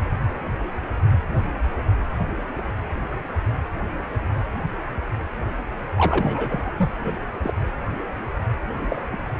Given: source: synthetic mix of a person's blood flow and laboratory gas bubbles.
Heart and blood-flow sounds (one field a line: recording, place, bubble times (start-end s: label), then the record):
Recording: Doppler ultrasound of blood flow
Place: precordium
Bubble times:
5.97-6.71 s: bubbles
6.78-6.91 s: bubbles
7.04-7.18 s: bubbles
7.42-7.53 s: bubbles
8.80-8.87 s: bubbles
8.89-9.02 s: bubbles
9.12-9.18 s: bubbles
From the record:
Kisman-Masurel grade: 221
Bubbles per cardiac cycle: several, 3 to 8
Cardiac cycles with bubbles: 10 to 50%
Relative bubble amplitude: barely perceptible (0.100 to 0.250)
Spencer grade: 2 (many but less than half of the cardiac periods contain bubble signals, singularly or in groups)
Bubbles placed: anywhere in the cardiac cycle